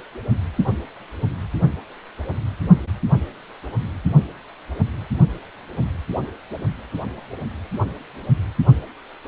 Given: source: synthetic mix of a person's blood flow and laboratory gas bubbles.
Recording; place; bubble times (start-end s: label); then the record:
Doppler ultrasound of blood flow; precordium
no bubbles
From the record:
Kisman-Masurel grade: 000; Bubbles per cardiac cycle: 0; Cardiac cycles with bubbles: 0%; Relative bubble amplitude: no bubbles discernible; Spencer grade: 0 (complete lack of bubble signals)